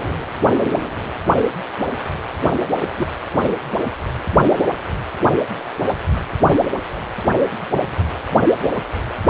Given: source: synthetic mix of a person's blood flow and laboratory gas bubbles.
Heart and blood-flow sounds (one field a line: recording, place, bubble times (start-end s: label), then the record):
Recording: Doppler ultrasound of blood flow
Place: precordium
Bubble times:
2.97-3.07 s: bubbles
From the record:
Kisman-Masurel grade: 112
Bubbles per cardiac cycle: 1 to 2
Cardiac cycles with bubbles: 1 to 10%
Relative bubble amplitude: moderate (0.250 to 0.450)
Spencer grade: 1 (occasional bubble signal discernible with the cardiac motion signal, with majority of cardiac periods free of bubbles)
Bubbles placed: anywhere in the cardiac cycle